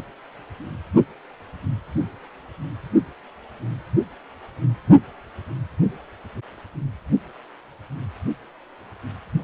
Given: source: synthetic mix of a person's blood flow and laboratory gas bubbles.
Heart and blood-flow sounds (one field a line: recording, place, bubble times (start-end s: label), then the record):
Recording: Doppler ultrasound of blood flow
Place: precordium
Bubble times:
no bubbles
From the record:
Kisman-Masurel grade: 000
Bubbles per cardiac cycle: 0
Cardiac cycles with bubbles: 0%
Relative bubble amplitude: no bubbles discernible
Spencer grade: 0 (complete lack of bubble signals)